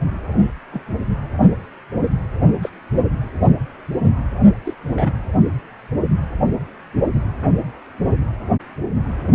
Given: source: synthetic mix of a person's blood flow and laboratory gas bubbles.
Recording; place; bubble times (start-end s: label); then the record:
Doppler ultrasound of blood flow; precordium
0.71-0.81 s: bubbles
2.62-2.69 s: bubbles
4.65-4.74 s: bubbles
4.93-5.13 s: bubbles
From the record:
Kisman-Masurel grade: 121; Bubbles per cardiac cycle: 1 to 2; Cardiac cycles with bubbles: 10 to 50%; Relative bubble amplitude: barely perceptible (0.100 to 0.250); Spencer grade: 2 (many but less than half of the cardiac periods contain bubble signals, singularly or in groups); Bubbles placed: anywhere in the cardiac cycle